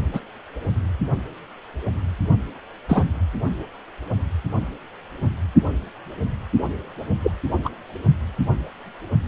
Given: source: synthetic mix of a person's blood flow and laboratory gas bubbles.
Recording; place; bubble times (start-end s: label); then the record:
Doppler ultrasound of blood flow; precordium
0.13-0.21 s: bubbles
2.88-3.04 s: bubbles
7.23-7.31 s: bubbles
7.65-7.69 s: bubbles
From the record:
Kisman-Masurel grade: 123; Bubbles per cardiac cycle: 1 to 2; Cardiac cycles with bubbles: 10 to 50%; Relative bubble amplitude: loud (0.450 to 0.775); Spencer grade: 2 (many but less than half of the cardiac periods contain bubble signals, singularly or in groups); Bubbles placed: only in the low amplitude regions of the cardiac cycle